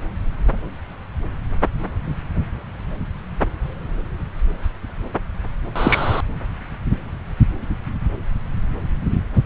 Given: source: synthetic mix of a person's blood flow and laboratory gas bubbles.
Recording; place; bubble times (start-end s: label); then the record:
Doppler ultrasound of blood flow; subclavian vein
5.75-6.21 s: bubbles
From the record:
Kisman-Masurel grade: 113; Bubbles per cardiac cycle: 1 to 2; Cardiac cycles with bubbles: 1 to 10%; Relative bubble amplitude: loud (0.450 to 0.775); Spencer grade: 1 (occasional bubble signal discernible with the cardiac motion signal, with majority of cardiac periods free of bubbles); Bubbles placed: anywhere in the cardiac cycle